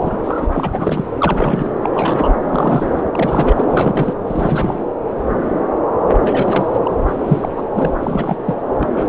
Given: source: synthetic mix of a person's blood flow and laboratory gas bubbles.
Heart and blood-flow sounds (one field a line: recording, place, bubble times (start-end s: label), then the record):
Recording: Doppler ultrasound of blood flow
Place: subclavian vein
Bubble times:
0.00-0.46 s: bubbles
0.51-1.04 s: bubbles
1.18-1.72 s: bubbles
1.81-1.89 s: bubbles
1.92-2.35 s: bubbles
2.50-3.05 s: bubbles
3.13-4.13 s: bubbles
4.27-4.82 s: bubbles
6.14-6.91 s: bubbles
7.07-7.14 s: bubbles
7.23-7.49 s: bubbles
7.56-7.62 s: bubbles
7.75-7.91 s: bubbles
8.03-8.37 s: bubbles
8.45-8.55 s: bubbles
8.79-9.09 s: bubbles
From the record:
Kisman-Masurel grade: 332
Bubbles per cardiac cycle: rolling drumbeat, 9 or more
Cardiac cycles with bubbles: 50 to 99%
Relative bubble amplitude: moderate (0.250 to 0.450)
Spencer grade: 3 (all of the cardiac periods contain showers or single bubble signals, but not dominating or overriding the cardiac motion signals)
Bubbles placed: anywhere in the cardiac cycle